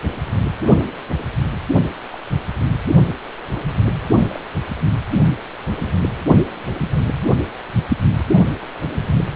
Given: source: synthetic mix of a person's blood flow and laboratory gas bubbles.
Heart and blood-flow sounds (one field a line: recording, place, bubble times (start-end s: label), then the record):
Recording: Doppler ultrasound of blood flow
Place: precordium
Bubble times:
2.12-2.19 s: bubbles
4.28-4.40 s: bubbles
From the record:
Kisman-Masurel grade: 121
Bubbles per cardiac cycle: 1 to 2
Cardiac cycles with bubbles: 10 to 50%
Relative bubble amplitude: barely perceptible (0.100 to 0.250)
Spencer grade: 2 (many but less than half of the cardiac periods contain bubble signals, singularly or in groups)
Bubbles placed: anywhere in the cardiac cycle